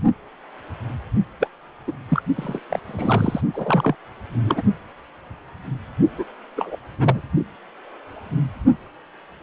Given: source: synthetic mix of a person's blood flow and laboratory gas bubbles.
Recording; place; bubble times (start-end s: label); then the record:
Doppler ultrasound of blood flow; precordium
1.40-1.48 s: bubbles
1.87-1.93 s: bubbles
2.08-2.22 s: bubbles
2.36-2.59 s: bubbles
2.71-2.79 s: bubbles
2.87-3.41 s: bubbles
3.53-3.95 s: bubbles
4.43-4.62 s: bubbles
6.17-6.24 s: bubbles
6.56-6.76 s: bubbles
6.98-7.21 s: bubbles
From the record:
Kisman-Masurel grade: 232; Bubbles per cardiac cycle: several, 3 to 8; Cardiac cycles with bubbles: 50 to 99%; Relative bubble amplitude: moderate (0.250 to 0.450); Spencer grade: 3 (all of the cardiac periods contain showers or single bubble signals, but not dominating or overriding the cardiac motion signals); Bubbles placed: only in the low amplitude regions of the cardiac cycle